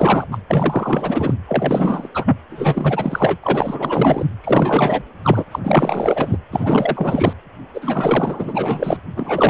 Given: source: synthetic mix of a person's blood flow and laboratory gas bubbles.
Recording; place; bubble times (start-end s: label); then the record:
Doppler ultrasound of blood flow; precordium
0.00-0.26 s: bubbles
0.31-0.38 s: bubbles
0.50-1.34 s: bubbles
1.47-2.08 s: bubbles
2.14-2.38 s: bubbles
2.50-3.36 s: bubbles
3.42-4.27 s: bubbles
4.44-5.03 s: bubbles
5.23-5.45 s: bubbles
5.52-5.59 s: bubbles
5.64-6.38 s: bubbles
6.52-7.33 s: bubbles
7.74-8.97 s: bubbles
9.15-9.50 s: bubbles
From the record:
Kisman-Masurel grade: 444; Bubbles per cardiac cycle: continuous sound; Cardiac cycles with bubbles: 100%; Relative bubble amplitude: maximal (0.775 to 0.999); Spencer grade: 4 (maximum detectable bubble signal sounding continuously throughout systole and diastole of every cardiac period, and overriding the amplitude of the normal cardiac signals); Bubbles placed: anywhere in the cardiac cycle